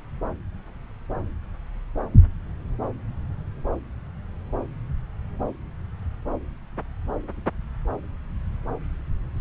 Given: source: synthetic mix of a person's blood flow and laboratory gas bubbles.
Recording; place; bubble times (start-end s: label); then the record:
Doppler ultrasound of blood flow; subclavian vein
9.37-9.41 s: bubbles
From the record:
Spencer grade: 1 (occasional bubble signal discernible with the cardiac motion signal, with majority of cardiac periods free of bubbles); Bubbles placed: anywhere in the cardiac cycle